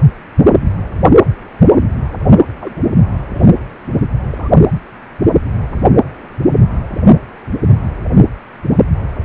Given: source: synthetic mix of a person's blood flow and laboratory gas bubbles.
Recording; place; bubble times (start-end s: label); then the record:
Doppler ultrasound of blood flow; precordium
2.61-2.76 s: bubbles
3.36-3.46 s: bubbles
4.30-4.50 s: bubbles
From the record:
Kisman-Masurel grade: 221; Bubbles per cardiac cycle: several, 3 to 8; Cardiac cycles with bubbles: 10 to 50%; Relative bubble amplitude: barely perceptible (0.100 to 0.250); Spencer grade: 2 (many but less than half of the cardiac periods contain bubble signals, singularly or in groups); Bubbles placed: only in the low amplitude regions of the cardiac cycle